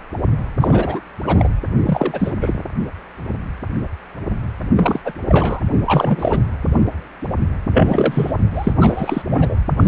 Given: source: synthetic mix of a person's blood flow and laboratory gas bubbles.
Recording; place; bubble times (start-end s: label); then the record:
Doppler ultrasound of blood flow; precordium
0.60-1.00 s: bubbles
1.22-1.49 s: bubbles
1.85-2.34 s: bubbles
2.41-2.56 s: bubbles
4.77-5.01 s: bubbles
5.05-5.13 s: bubbles
5.28-5.61 s: bubbles
5.85-6.41 s: bubbles
7.73-8.32 s: bubbles
8.54-8.72 s: bubbles
8.80-9.22 s: bubbles
9.27-9.55 s: bubbles
9.77-9.87 s: bubbles
From the record:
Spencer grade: 3 (all of the cardiac periods contain showers or single bubble signals, but not dominating or overriding the cardiac motion signals); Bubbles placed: anywhere in the cardiac cycle